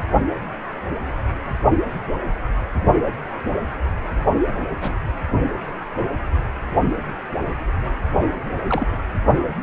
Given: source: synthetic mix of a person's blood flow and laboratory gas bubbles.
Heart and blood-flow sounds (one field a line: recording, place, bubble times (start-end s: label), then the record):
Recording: Doppler ultrasound of blood flow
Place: precordium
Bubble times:
4.81-4.92 s: bubbles
8.68-8.86 s: bubbles
From the record:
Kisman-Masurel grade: 122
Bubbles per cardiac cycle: 1 to 2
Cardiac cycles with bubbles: 10 to 50%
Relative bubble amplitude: moderate (0.250 to 0.450)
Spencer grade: 2 (many but less than half of the cardiac periods contain bubble signals, singularly or in groups)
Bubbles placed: only in the low amplitude regions of the cardiac cycle